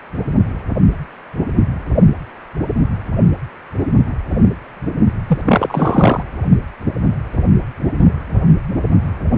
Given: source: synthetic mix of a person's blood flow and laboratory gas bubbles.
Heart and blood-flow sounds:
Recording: Doppler ultrasound of blood flow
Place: precordium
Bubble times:
5.28-5.41 s: bubbles
5.44-6.22 s: bubbles
From the record:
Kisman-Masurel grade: 223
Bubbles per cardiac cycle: several, 3 to 8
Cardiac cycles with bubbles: 10 to 50%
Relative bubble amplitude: loud (0.450 to 0.775)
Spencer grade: 2 (many but less than half of the cardiac periods contain bubble signals, singularly or in groups)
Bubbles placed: anywhere in the cardiac cycle

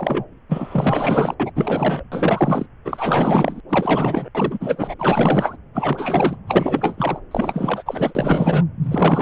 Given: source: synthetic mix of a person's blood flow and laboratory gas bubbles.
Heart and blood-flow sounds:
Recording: Doppler ultrasound of blood flow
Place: subclavian vein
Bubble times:
0.00-0.24 s: bubbles
0.49-1.35 s: bubbles
1.40-1.52 s: bubbles
1.55-2.04 s: bubbles
2.11-2.66 s: bubbles
2.84-3.60 s: bubbles
3.69-4.29 s: bubbles
4.34-4.95 s: bubbles
4.99-5.57 s: bubbles
5.73-6.37 s: bubbles
6.46-7.20 s: bubbles
7.31-8.64 s: bubbles
8.82-9.22 s: bubbles
From the record:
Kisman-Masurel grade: 444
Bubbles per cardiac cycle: continuous sound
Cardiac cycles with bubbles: 100%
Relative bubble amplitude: maximal (0.775 to 0.999)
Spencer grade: 4 (maximum detectable bubble signal sounding continuously throughout systole and diastole of every cardiac period, and overriding the amplitude of the normal cardiac signals)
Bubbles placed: anywhere in the cardiac cycle

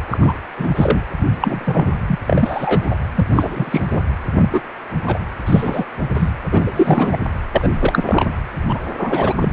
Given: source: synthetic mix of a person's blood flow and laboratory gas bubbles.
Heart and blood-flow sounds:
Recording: Doppler ultrasound of blood flow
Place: precordium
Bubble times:
0.10-0.18 s: bubbles
0.21-0.33 s: bubbles
0.57-1.02 s: bubbles
1.41-1.92 s: bubbles
2.08-2.19 s: bubbles
2.27-2.96 s: bubbles
3.15-3.25 s: bubbles
3.33-4.02 s: bubbles
4.38-4.50 s: bubbles
4.53-4.61 s: bubbles
5.06-5.19 s: bubbles
5.46-5.84 s: bubbles
6.14-6.31 s: bubbles
6.45-7.18 s: bubbles
7.52-7.68 s: bubbles
7.74-8.43 s: bubbles
8.68-8.83 s: bubbles
8.97-9.53 s: bubbles
From the record:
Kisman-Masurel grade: 243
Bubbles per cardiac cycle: several, 3 to 8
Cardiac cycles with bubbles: 100%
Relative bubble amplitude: loud (0.450 to 0.775)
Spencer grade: 3 (all of the cardiac periods contain showers or single bubble signals, but not dominating or overriding the cardiac motion signals)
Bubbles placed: anywhere in the cardiac cycle

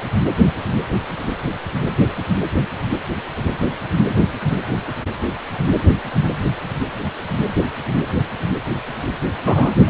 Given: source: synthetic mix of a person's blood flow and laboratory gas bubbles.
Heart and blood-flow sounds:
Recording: Doppler ultrasound of blood flow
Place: precordium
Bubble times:
9.44-9.71 s: bubbles
9.86-9.89 s: bubbles
From the record:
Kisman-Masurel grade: 213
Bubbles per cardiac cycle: several, 3 to 8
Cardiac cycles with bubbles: 1 to 10%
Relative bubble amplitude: loud (0.450 to 0.775)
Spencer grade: 1 (occasional bubble signal discernible with the cardiac motion signal, with majority of cardiac periods free of bubbles)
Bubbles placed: anywhere in the cardiac cycle

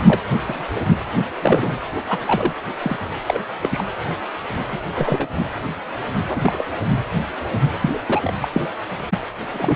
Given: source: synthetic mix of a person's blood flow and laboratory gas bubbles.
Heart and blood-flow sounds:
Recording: Doppler ultrasound of blood flow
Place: precordium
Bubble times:
0.00-0.02 s: bubbles
0.07-0.20 s: bubbles
0.46-0.67 s: bubbles
1.42-1.74 s: bubbles
2.08-2.19 s: bubbles
2.25-2.54 s: bubbles
2.81-2.96 s: bubbles
3.26-3.40 s: bubbles
3.62-3.83 s: bubbles
4.68-4.78 s: bubbles
4.93-5.27 s: bubbles
6.28-6.64 s: bubbles
7.81-7.90 s: bubbles
7.93-8.02 s: bubbles
8.08-8.33 s: bubbles
8.41-8.47 s: bubbles
8.53-8.62 s: bubbles
9.53-9.76 s: bubbles
From the record:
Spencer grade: 3 (all of the cardiac periods contain showers or single bubble signals, but not dominating or overriding the cardiac motion signals)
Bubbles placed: anywhere in the cardiac cycle

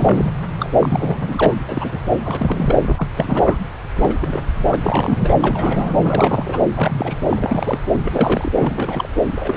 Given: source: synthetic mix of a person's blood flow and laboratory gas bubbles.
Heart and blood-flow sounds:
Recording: Doppler ultrasound of blood flow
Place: subclavian vein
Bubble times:
0.00-0.31 s: bubbles
0.59-0.70 s: bubbles
0.79-1.54 s: bubbles
1.69-2.00 s: bubbles
2.25-2.80 s: bubbles
2.83-3.08 s: bubbles
3.17-3.57 s: bubbles
3.95-4.15 s: bubbles
4.21-4.40 s: bubbles
4.54-4.76 s: bubbles
4.79-5.34 s: bubbles
5.40-5.95 s: bubbles
6.02-6.60 s: bubbles
6.75-7.18 s: bubbles
7.29-7.80 s: bubbles
7.98-8.52 s: bubbles
8.56-9.09 s: bubbles
9.35-9.57 s: bubbles
From the record:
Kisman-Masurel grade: 342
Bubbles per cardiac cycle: rolling drumbeat, 9 or more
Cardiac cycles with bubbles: 100%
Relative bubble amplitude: moderate (0.250 to 0.450)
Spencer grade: 3 (all of the cardiac periods contain showers or single bubble signals, but not dominating or overriding the cardiac motion signals)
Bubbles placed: anywhere in the cardiac cycle

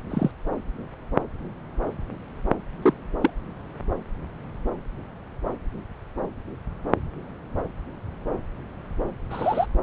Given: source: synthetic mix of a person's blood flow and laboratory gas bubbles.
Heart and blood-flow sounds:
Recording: Doppler ultrasound of blood flow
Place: subclavian vein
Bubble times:
0.10-0.31 s: bubbles
2.82-2.94 s: bubbles
3.21-3.31 s: bubbles
9.30-9.66 s: bubbles
From the record:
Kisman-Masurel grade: 122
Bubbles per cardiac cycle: 1 to 2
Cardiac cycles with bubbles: 10 to 50%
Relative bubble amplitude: moderate (0.250 to 0.450)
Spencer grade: 2 (many but less than half of the cardiac periods contain bubble signals, singularly or in groups)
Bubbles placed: anywhere in the cardiac cycle

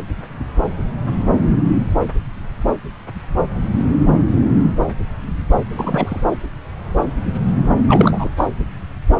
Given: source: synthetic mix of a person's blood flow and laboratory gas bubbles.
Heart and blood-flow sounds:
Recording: Doppler ultrasound of blood flow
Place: subclavian vein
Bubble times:
5.75-6.23 s: bubbles
7.87-8.29 s: bubbles
8.37-8.51 s: bubbles
From the record:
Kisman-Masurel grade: 213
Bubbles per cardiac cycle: several, 3 to 8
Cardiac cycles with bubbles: 1 to 10%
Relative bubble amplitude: loud (0.450 to 0.775)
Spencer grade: 1 (occasional bubble signal discernible with the cardiac motion signal, with majority of cardiac periods free of bubbles)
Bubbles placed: anywhere in the cardiac cycle

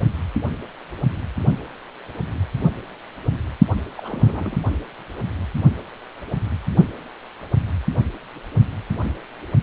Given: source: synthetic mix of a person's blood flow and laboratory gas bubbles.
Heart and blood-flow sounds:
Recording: Doppler ultrasound of blood flow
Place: precordium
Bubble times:
3.97-4.57 s: bubbles
From the record:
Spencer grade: 1 (occasional bubble signal discernible with the cardiac motion signal, with majority of cardiac periods free of bubbles)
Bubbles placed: only in the low amplitude regions of the cardiac cycle

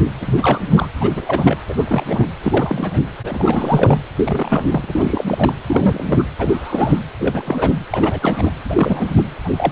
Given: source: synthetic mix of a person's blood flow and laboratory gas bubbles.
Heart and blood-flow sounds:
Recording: Doppler ultrasound of blood flow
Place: precordium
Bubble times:
0.05-0.11 s: bubbles
0.21-0.61 s: bubbles
0.69-0.88 s: bubbles
1.00-1.10 s: bubbles
1.15-1.58 s: bubbles
1.68-1.74 s: bubbles
1.77-1.84 s: bubbles
1.87-2.03 s: bubbles
2.07-2.25 s: bubbles
2.42-3.01 s: bubbles
3.24-3.98 s: bubbles
4.17-5.53 s: bubbles
5.67-6.25 s: bubbles
6.38-7.00 s: bubbles
7.18-7.73 s: bubbles
7.90-8.51 s: bubbles
8.68-9.22 s: bubbles
9.44-9.49 s: bubbles
9.57-9.72 s: bubbles
From the record:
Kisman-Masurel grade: 342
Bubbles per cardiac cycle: rolling drumbeat, 9 or more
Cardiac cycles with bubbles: 100%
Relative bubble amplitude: moderate (0.250 to 0.450)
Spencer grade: 3 (all of the cardiac periods contain showers or single bubble signals, but not dominating or overriding the cardiac motion signals)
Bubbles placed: anywhere in the cardiac cycle

